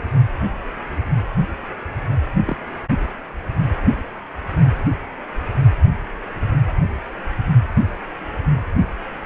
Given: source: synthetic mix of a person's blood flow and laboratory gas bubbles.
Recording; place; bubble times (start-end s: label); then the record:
Doppler ultrasound of blood flow; precordium
2.45-2.57 s: bubbles
From the record:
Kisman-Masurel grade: 111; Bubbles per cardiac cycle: 1 to 2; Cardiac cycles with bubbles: 1 to 10%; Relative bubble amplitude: barely perceptible (0.100 to 0.250); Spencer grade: 1 (occasional bubble signal discernible with the cardiac motion signal, with majority of cardiac periods free of bubbles); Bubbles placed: anywhere in the cardiac cycle